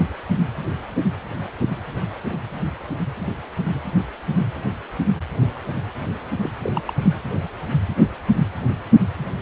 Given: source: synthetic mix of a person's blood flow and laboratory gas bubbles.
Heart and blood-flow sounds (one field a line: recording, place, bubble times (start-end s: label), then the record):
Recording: Doppler ultrasound of blood flow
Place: precordium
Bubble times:
6.42-6.50 s: bubbles
6.63-6.81 s: bubbles
6.85-6.93 s: bubbles
7.02-7.13 s: bubbles
From the record:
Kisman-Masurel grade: 212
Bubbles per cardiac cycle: several, 3 to 8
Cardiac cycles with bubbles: 1 to 10%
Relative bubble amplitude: moderate (0.250 to 0.450)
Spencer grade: 1 (occasional bubble signal discernible with the cardiac motion signal, with majority of cardiac periods free of bubbles)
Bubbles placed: anywhere in the cardiac cycle